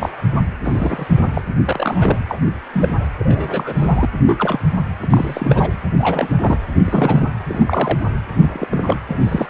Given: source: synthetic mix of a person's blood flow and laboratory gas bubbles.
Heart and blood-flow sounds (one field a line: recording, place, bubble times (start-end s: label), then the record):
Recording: Doppler ultrasound of blood flow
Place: precordium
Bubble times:
0.00-0.09 s: bubbles
0.64-1.23 s: bubbles
1.33-1.42 s: bubbles
1.59-2.18 s: bubbles
2.28-2.40 s: bubbles
2.73-2.88 s: bubbles
3.19-3.74 s: bubbles
3.77-4.09 s: bubbles
4.26-4.59 s: bubbles
5.02-5.71 s: bubbles
5.97-6.35 s: bubbles
6.40-6.58 s: bubbles
6.84-7.27 s: bubbles
7.43-7.99 s: bubbles
8.41-8.67 s: bubbles
8.71-9.02 s: bubbles
9.08-9.50 s: bubbles
From the record:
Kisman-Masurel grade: 242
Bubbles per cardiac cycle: several, 3 to 8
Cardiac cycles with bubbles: 100%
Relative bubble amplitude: moderate (0.250 to 0.450)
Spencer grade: 3 (all of the cardiac periods contain showers or single bubble signals, but not dominating or overriding the cardiac motion signals)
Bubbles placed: anywhere in the cardiac cycle